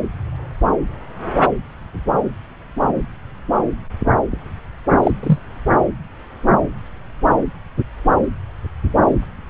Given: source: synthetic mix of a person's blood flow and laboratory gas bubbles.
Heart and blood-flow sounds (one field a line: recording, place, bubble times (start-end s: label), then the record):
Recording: Doppler ultrasound of blood flow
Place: subclavian vein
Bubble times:
5.03-5.11 s: bubbles
5.23-5.38 s: bubbles
From the record:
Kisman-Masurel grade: 113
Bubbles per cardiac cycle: 1 to 2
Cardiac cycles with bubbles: 1 to 10%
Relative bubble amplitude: loud (0.450 to 0.775)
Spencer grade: 1 (occasional bubble signal discernible with the cardiac motion signal, with majority of cardiac periods free of bubbles)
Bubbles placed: anywhere in the cardiac cycle